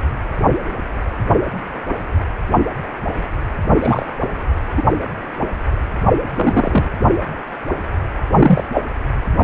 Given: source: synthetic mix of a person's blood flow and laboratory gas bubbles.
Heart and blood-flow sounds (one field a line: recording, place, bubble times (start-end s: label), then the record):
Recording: Doppler ultrasound of blood flow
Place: precordium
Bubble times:
3.81-4.06 s: bubbles
4.77-4.83 s: bubbles
6.36-6.88 s: bubbles
8.33-8.64 s: bubbles
8.74-8.84 s: bubbles
From the record:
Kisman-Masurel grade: 123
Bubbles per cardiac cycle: 1 to 2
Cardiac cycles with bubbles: 10 to 50%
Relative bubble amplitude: loud (0.450 to 0.775)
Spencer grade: 2 (many but less than half of the cardiac periods contain bubble signals, singularly or in groups)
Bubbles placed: anywhere in the cardiac cycle